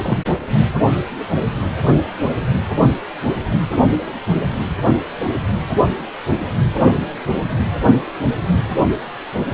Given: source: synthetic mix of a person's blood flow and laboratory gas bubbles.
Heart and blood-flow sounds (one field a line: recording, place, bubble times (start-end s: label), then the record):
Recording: Doppler ultrasound of blood flow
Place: precordium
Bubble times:
0.03-0.18 s: bubbles
From the record:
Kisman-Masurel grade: 112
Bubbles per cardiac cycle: 1 to 2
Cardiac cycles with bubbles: 1 to 10%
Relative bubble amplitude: moderate (0.250 to 0.450)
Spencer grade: 1 (occasional bubble signal discernible with the cardiac motion signal, with majority of cardiac periods free of bubbles)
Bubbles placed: only in the low amplitude regions of the cardiac cycle